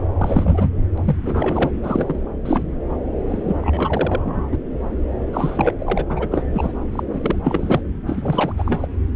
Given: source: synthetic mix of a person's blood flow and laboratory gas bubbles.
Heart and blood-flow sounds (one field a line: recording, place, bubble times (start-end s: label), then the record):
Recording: Doppler ultrasound of blood flow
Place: subclavian vein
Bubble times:
0.18-0.70 s: bubbles
0.97-1.01 s: bubbles
1.04-1.17 s: bubbles
1.23-1.71 s: bubbles
1.83-2.19 s: bubbles
2.45-2.63 s: bubbles
3.29-4.57 s: bubbles
5.33-5.73 s: bubbles
5.78-6.04 s: bubbles
6.09-6.28 s: bubbles
6.31-6.46 s: bubbles
6.53-6.72 s: bubbles
6.92-7.03 s: bubbles
7.13-7.35 s: bubbles
7.43-7.81 s: bubbles
8.07-8.52 s: bubbles
8.57-8.88 s: bubbles
From the record:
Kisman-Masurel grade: 342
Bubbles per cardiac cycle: rolling drumbeat, 9 or more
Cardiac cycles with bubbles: 100%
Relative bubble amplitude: moderate (0.250 to 0.450)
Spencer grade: 3 (all of the cardiac periods contain showers or single bubble signals, but not dominating or overriding the cardiac motion signals)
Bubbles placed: anywhere in the cardiac cycle